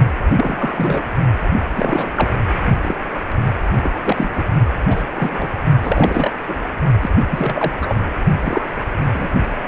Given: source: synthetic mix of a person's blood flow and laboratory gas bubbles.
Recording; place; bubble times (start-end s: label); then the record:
Doppler ultrasound of blood flow; precordium
0.36-1.04 s: bubbles
1.72-2.31 s: bubbles
2.52-2.72 s: bubbles
2.81-2.96 s: bubbles
3.82-3.90 s: bubbles
4.05-4.29 s: bubbles
4.33-4.44 s: bubbles
4.85-5.04 s: bubbles
5.15-5.50 s: bubbles
5.82-6.32 s: bubbles
6.46-6.57 s: bubbles
7.01-7.10 s: bubbles
7.30-7.72 s: bubbles
7.81-7.96 s: bubbles
8.41-8.64 s: bubbles
9.15-9.29 s: bubbles
From the record:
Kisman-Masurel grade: 242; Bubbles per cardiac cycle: several, 3 to 8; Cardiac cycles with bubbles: 100%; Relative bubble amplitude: moderate (0.250 to 0.450); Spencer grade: 3 (all of the cardiac periods contain showers or single bubble signals, but not dominating or overriding the cardiac motion signals); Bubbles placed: only in the low amplitude regions of the cardiac cycle